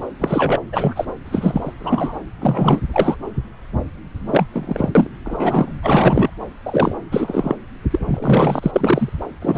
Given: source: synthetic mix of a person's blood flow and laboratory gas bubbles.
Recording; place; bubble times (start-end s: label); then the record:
Doppler ultrasound of blood flow; subclavian vein
0.19-0.62 s: bubbles
0.72-1.05 s: bubbles
1.25-1.74 s: bubbles
1.79-2.15 s: bubbles
2.40-2.81 s: bubbles
2.92-3.16 s: bubbles
4.13-4.47 s: bubbles
4.52-4.90 s: bubbles
4.95-5.07 s: bubbles
5.24-5.74 s: bubbles
5.82-6.30 s: bubbles
6.65-6.96 s: bubbles
7.11-7.55 s: bubbles
7.90-7.99 s: bubbles
8.08-9.09 s: bubbles
9.41-9.58 s: bubbles
From the record:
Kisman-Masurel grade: 233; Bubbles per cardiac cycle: several, 3 to 8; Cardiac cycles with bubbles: 50 to 99%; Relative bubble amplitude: loud (0.450 to 0.775); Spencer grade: 3 (all of the cardiac periods contain showers or single bubble signals, but not dominating or overriding the cardiac motion signals); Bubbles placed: anywhere in the cardiac cycle